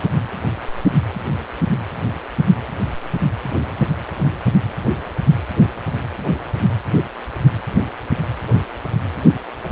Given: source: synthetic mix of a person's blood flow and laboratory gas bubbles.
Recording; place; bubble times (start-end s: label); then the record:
Doppler ultrasound of blood flow; precordium
no bubbles
From the record:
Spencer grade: 0 (complete lack of bubble signals)